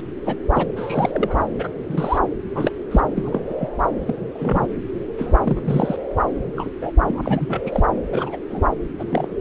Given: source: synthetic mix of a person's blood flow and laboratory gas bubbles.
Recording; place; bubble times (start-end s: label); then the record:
Doppler ultrasound of blood flow; subclavian vein
0.24-0.36 s: bubbles
0.54-0.66 s: bubbles
0.76-1.44 s: bubbles
1.58-1.69 s: bubbles
1.89-2.19 s: bubbles
2.54-2.71 s: bubbles
2.91-3.00 s: bubbles
3.17-3.40 s: bubbles
3.50-3.54 s: bubbles
3.58-3.68 s: bubbles
4.07-4.13 s: bubbles
4.34-4.67 s: bubbles
5.18-5.34 s: bubbles
5.44-5.96 s: bubbles
6.34-6.41 s: bubbles
6.56-6.70 s: bubbles
6.81-6.91 s: bubbles
7.01-7.62 s: bubbles
7.66-7.88 s: bubbles
8.12-8.37 s: bubbles
8.50-8.62 s: bubbles
8.99-9.36 s: bubbles
From the record:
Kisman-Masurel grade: 242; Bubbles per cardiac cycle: several, 3 to 8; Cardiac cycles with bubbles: 100%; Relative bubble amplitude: moderate (0.250 to 0.450); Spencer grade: 3 (all of the cardiac periods contain showers or single bubble signals, but not dominating or overriding the cardiac motion signals); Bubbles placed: anywhere in the cardiac cycle